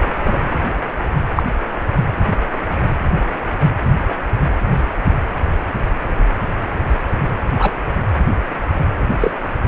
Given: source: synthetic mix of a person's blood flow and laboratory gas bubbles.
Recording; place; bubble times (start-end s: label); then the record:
Doppler ultrasound of blood flow; precordium
0.24-0.38 s: bubbles
1.36-1.43 s: bubbles
7.58-7.73 s: bubbles
9.21-9.32 s: bubbles
From the record:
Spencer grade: 2 (many but less than half of the cardiac periods contain bubble signals, singularly or in groups); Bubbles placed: anywhere in the cardiac cycle